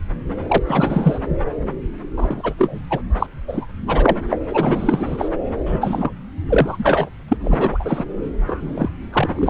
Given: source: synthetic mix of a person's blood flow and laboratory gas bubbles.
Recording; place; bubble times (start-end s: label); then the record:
Doppler ultrasound of blood flow; subclavian vein
0.48-0.58 s: bubbles
0.67-1.19 s: bubbles
2.17-2.54 s: bubbles
2.58-2.81 s: bubbles
2.90-3.02 s: bubbles
3.19-3.26 s: bubbles
3.47-3.66 s: bubbles
3.87-4.17 s: bubbles
4.29-4.40 s: bubbles
4.54-5.29 s: bubbles
5.66-6.12 s: bubbles
6.49-7.09 s: bubbles
7.28-7.37 s: bubbles
7.43-8.04 s: bubbles
8.47-8.89 s: bubbles
9.12-9.50 s: bubbles
From the record:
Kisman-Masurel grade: 243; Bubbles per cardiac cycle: several, 3 to 8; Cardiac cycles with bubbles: 100%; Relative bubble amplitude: loud (0.450 to 0.775); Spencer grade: 3 (all of the cardiac periods contain showers or single bubble signals, but not dominating or overriding the cardiac motion signals); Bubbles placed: anywhere in the cardiac cycle